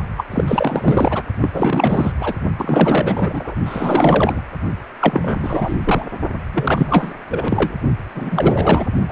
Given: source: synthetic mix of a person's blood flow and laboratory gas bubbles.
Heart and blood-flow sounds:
Doppler ultrasound of blood flow; precordium
0.17-0.26 s: bubbles
0.30-0.44 s: bubbles
0.48-1.23 s: bubbles
1.41-1.51 s: bubbles
1.53-2.12 s: bubbles
2.18-2.34 s: bubbles
2.58-3.54 s: bubbles
3.65-4.41 s: bubbles
5.00-5.78 s: bubbles
5.84-6.07 s: bubbles
6.53-7.14 s: bubbles
7.30-7.75 s: bubbles
8.15-8.86 s: bubbles
9.09-9.12 s: bubbles
From the record:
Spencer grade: 4 (maximum detectable bubble signal sounding continuously throughout systole and diastole of every cardiac period, and overriding the amplitude of the normal cardiac signals); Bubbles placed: only in the low amplitude regions of the cardiac cycle

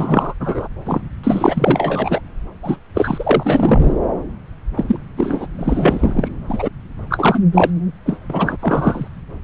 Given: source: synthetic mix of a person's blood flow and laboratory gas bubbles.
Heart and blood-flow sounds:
Doppler ultrasound of blood flow; subclavian vein
0.00-0.34 s: bubbles
0.40-0.68 s: bubbles
0.85-1.02 s: bubbles
1.23-2.21 s: bubbles
2.62-2.78 s: bubbles
2.95-3.93 s: bubbles
4.77-4.99 s: bubbles
5.17-5.46 s: bubbles
5.58-6.29 s: bubbles
6.49-6.69 s: bubbles
7.10-7.39 s: bubbles
7.54-7.70 s: bubbles
8.05-8.18 s: bubbles
8.29-8.56 s: bubbles
8.59-9.08 s: bubbles
From the record:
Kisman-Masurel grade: 343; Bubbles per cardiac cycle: rolling drumbeat, 9 or more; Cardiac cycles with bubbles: 100%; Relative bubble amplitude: loud (0.450 to 0.775); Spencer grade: 3 (all of the cardiac periods contain showers or single bubble signals, but not dominating or overriding the cardiac motion signals); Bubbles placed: anywhere in the cardiac cycle

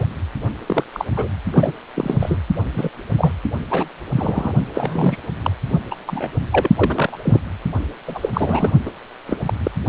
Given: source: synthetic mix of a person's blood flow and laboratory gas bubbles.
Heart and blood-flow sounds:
Doppler ultrasound of blood flow; precordium
0.00-0.07 s: bubbles
0.66-0.83 s: bubbles
0.92-1.05 s: bubbles
1.16-1.28 s: bubbles
1.53-1.72 s: bubbles
1.95-2.17 s: bubbles
2.20-2.38 s: bubbles
2.74-2.90 s: bubbles
3.18-3.33 s: bubbles
3.70-3.89 s: bubbles
4.16-4.53 s: bubbles
4.75-5.17 s: bubbles
5.42-5.52 s: bubbles
5.91-5.95 s: bubbles
6.06-6.31 s: bubbles
6.52-6.69 s: bubbles
6.75-7.17 s: bubbles
7.23-7.41 s: bubbles
8.07-8.29 s: bubbles
8.33-8.72 s: bubbles
8.85-8.90 s: bubbles
9.27-9.38 s: bubbles
9.46-9.54 s: bubbles
9.63-9.71 s: bubbles
From the record:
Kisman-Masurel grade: 242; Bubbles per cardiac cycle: several, 3 to 8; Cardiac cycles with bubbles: 100%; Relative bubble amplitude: moderate (0.250 to 0.450); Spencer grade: 3 (all of the cardiac periods contain showers or single bubble signals, but not dominating or overriding the cardiac motion signals); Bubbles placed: only in the low amplitude regions of the cardiac cycle

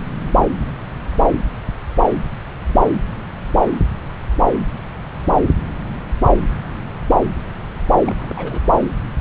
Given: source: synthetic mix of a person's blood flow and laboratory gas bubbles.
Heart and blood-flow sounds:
Doppler ultrasound of blood flow; subclavian vein
8.00-8.60 s: bubbles
From the record:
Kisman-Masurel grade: 211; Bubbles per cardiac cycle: several, 3 to 8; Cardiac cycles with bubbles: 1 to 10%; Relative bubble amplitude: barely perceptible (0.100 to 0.250); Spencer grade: 1 (occasional bubble signal discernible with the cardiac motion signal, with majority of cardiac periods free of bubbles); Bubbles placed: anywhere in the cardiac cycle

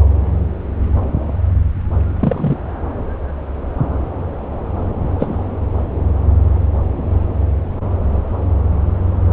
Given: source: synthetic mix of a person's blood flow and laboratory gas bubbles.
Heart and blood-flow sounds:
Doppler ultrasound of blood flow; subclavian vein
2.19-2.57 s: bubbles
5.17-5.51 s: bubbles
From the record:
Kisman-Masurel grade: 112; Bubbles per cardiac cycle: 1 to 2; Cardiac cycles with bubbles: 1 to 10%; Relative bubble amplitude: moderate (0.250 to 0.450); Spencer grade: 1 (occasional bubble signal discernible with the cardiac motion signal, with majority of cardiac periods free of bubbles); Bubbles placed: anywhere in the cardiac cycle

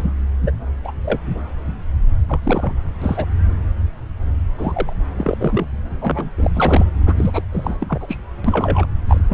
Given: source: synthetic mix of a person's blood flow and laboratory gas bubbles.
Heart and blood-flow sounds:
Doppler ultrasound of blood flow; subclavian vein
0.00-0.14 s: bubbles
0.42-0.51 s: bubbles
0.84-0.91 s: bubbles
1.04-1.19 s: bubbles
2.27-2.74 s: bubbles
3.02-3.25 s: bubbles
4.58-4.93 s: bubbles
5.18-5.68 s: bubbles
6.01-6.30 s: bubbles
6.38-6.51 s: bubbles
6.54-6.85 s: bubbles
7.06-7.43 s: bubbles
7.52-7.76 s: bubbles
7.80-8.18 s: bubbles
8.44-8.86 s: bubbles
9.09-9.22 s: bubbles
9.29-9.33 s: bubbles
From the record:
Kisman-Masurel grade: 232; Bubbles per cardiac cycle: several, 3 to 8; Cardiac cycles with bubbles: 50 to 99%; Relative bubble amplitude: moderate (0.250 to 0.450); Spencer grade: 3 (all of the cardiac periods contain showers or single bubble signals, but not dominating or overriding the cardiac motion signals); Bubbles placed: anywhere in the cardiac cycle

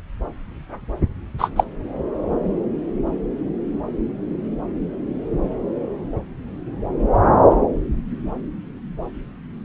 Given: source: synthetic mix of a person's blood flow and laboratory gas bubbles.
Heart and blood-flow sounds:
Doppler ultrasound of blood flow; subclavian vein
1.39-1.51 s: bubbles
1.56-1.64 s: bubbles
From the record:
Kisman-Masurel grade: 123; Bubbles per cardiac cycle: 1 to 2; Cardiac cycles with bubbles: 10 to 50%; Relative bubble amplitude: loud (0.450 to 0.775); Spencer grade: 2 (many but less than half of the cardiac periods contain bubble signals, singularly or in groups); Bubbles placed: anywhere in the cardiac cycle

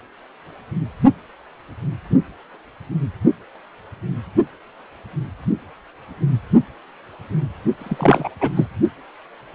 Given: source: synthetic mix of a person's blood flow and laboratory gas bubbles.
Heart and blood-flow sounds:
Doppler ultrasound of blood flow; precordium
7.79-8.29 s: bubbles
8.40-8.50 s: bubbles
8.56-8.68 s: bubbles
From the record:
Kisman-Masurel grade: 213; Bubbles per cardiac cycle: several, 3 to 8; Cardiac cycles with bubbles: 1 to 10%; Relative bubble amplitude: loud (0.450 to 0.775); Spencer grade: 1 (occasional bubble signal discernible with the cardiac motion signal, with majority of cardiac periods free of bubbles); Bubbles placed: only in the low amplitude regions of the cardiac cycle

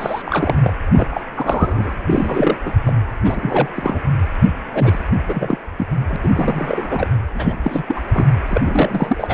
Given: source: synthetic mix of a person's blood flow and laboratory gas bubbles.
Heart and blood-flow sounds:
Doppler ultrasound of blood flow; precordium
0.00-0.22 s: bubbles
0.26-0.72 s: bubbles
0.93-1.07 s: bubbles
1.11-1.23 s: bubbles
1.34-1.94 s: bubbles
2.06-2.58 s: bubbles
2.65-2.71 s: bubbles
2.84-2.93 s: bubbles
3.24-3.69 s: bubbles
3.74-3.99 s: bubbles
4.73-4.99 s: bubbles
5.28-5.58 s: bubbles
5.78-5.88 s: bubbles
6.08-6.16 s: bubbles
6.23-7.08 s: bubbles
7.35-7.58 s: bubbles
7.64-7.84 s: bubbles
7.88-8.00 s: bubbles
8.12-8.26 s: bubbles
8.48-9.33 s: bubbles
From the record:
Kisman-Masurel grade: 342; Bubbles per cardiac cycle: rolling drumbeat, 9 or more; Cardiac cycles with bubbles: 100%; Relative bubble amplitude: moderate (0.250 to 0.450); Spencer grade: 3 (all of the cardiac periods contain showers or single bubble signals, but not dominating or overriding the cardiac motion signals); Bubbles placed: anywhere in the cardiac cycle

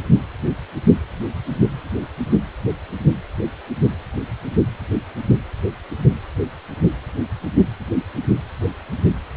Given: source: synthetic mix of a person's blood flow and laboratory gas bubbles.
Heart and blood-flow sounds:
Doppler ultrasound of blood flow; precordium
no bubbles
From the record:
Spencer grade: 0 (complete lack of bubble signals)

